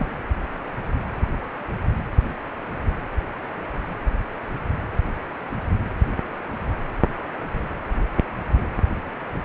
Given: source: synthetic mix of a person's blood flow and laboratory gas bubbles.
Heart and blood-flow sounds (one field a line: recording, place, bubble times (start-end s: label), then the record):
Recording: Doppler ultrasound of blood flow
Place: precordium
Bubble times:
0.00-0.07 s: bubbles
From the record:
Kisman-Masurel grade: 221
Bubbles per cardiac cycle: several, 3 to 8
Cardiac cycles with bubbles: 10 to 50%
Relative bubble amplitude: barely perceptible (0.100 to 0.250)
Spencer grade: 2 (many but less than half of the cardiac periods contain bubble signals, singularly or in groups)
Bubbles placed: anywhere in the cardiac cycle